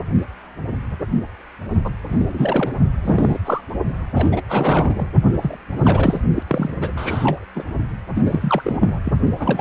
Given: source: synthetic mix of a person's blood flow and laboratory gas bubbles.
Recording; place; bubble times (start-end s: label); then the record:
Doppler ultrasound of blood flow; precordium
1.84-1.90 s: bubbles
2.09-2.71 s: bubbles
3.03-3.39 s: bubbles
3.45-3.61 s: bubbles
4.14-4.42 s: bubbles
4.48-5.07 s: bubbles
5.24-5.30 s: bubbles
5.42-5.57 s: bubbles
5.73-6.21 s: bubbles
6.34-6.42 s: bubbles
6.47-6.70 s: bubbles
6.81-6.93 s: bubbles
6.96-7.46 s: bubbles
7.55-7.63 s: bubbles
8.15-8.98 s: bubbles
9.04-9.12 s: bubbles
9.39-9.61 s: bubbles
From the record:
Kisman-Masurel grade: 332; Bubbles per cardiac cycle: rolling drumbeat, 9 or more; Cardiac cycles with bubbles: 50 to 99%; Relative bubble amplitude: moderate (0.250 to 0.450); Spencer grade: 3 (all of the cardiac periods contain showers or single bubble signals, but not dominating or overriding the cardiac motion signals); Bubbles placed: only in the low amplitude regions of the cardiac cycle